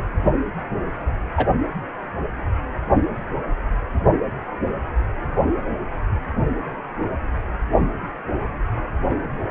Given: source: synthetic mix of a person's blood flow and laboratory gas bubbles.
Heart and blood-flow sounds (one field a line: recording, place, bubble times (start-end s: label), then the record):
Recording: Doppler ultrasound of blood flow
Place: precordium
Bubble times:
1.36-1.46 s: bubbles
From the record:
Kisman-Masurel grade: 113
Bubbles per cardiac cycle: 1 to 2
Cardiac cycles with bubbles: 1 to 10%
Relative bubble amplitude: loud (0.450 to 0.775)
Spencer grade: 1 (occasional bubble signal discernible with the cardiac motion signal, with majority of cardiac periods free of bubbles)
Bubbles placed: only in the low amplitude regions of the cardiac cycle